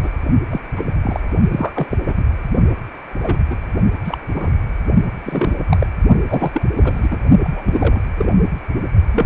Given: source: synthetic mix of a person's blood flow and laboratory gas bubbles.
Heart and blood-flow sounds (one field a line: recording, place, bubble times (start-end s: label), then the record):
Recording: Doppler ultrasound of blood flow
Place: precordium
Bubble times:
0.03-0.10 s: bubbles
0.50-0.60 s: bubbles
0.76-0.85 s: bubbles
1.02-1.20 s: bubbles
1.51-1.87 s: bubbles
1.91-1.97 s: bubbles
2.06-2.14 s: bubbles
2.17-2.24 s: bubbles
3.21-3.38 s: bubbles
3.50-3.56 s: bubbles
4.04-4.18 s: bubbles
4.29-4.50 s: bubbles
5.24-5.56 s: bubbles
5.70-5.78 s: bubbles
5.80-5.87 s: bubbles
6.29-6.62 s: bubbles
6.75-7.18 s: bubbles
7.44-8.01 s: bubbles
8.17-8.35 s: bubbles
9.12-9.26 s: bubbles
From the record:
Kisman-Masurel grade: 243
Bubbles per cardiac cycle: several, 3 to 8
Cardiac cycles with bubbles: 100%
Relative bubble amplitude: loud (0.450 to 0.775)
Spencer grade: 3 (all of the cardiac periods contain showers or single bubble signals, but not dominating or overriding the cardiac motion signals)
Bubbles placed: only in the low amplitude regions of the cardiac cycle